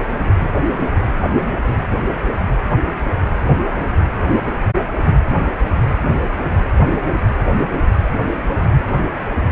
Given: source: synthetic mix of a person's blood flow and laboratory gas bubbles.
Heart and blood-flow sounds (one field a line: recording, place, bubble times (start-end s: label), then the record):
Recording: Doppler ultrasound of blood flow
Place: precordium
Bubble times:
no bubbles
From the record:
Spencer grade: 0 (complete lack of bubble signals)